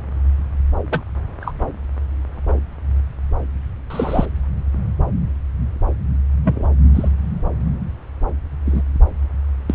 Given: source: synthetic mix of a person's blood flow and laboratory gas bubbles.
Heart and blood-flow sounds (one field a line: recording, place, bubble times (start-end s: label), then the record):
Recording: Doppler ultrasound of blood flow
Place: subclavian vein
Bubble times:
0.90-1.02 s: bubbles
1.41-1.54 s: bubbles
2.47-2.53 s: bubbles
3.90-4.25 s: bubbles
6.42-6.69 s: bubbles
6.94-7.08 s: bubbles
8.65-8.82 s: bubbles
9.70-9.74 s: bubbles
From the record:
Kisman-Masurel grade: 123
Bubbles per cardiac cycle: 1 to 2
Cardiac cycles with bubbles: 10 to 50%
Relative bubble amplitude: loud (0.450 to 0.775)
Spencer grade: 2 (many but less than half of the cardiac periods contain bubble signals, singularly or in groups)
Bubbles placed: anywhere in the cardiac cycle